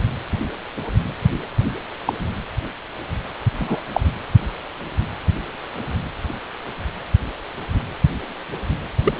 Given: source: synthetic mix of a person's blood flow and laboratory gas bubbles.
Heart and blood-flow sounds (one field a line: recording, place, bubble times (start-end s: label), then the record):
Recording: Doppler ultrasound of blood flow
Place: precordium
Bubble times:
2.06-2.13 s: bubbles
3.60-3.82 s: bubbles
3.92-4.00 s: bubbles
9.04-9.13 s: bubbles
From the record:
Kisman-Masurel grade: 123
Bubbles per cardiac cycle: 1 to 2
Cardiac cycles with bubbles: 10 to 50%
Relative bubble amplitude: loud (0.450 to 0.775)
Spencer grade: 2 (many but less than half of the cardiac periods contain bubble signals, singularly or in groups)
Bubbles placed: anywhere in the cardiac cycle